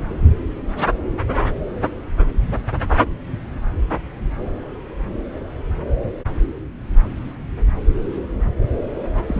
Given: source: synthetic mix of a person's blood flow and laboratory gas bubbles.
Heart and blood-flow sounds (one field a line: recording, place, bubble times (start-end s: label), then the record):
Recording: Doppler ultrasound of blood flow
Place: subclavian vein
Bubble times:
9.14-9.23 s: bubbles
9.27-9.40 s: bubbles
From the record:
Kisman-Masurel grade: 211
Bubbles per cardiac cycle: several, 3 to 8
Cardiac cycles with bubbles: 1 to 10%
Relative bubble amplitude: barely perceptible (0.100 to 0.250)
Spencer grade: 1 (occasional bubble signal discernible with the cardiac motion signal, with majority of cardiac periods free of bubbles)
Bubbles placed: anywhere in the cardiac cycle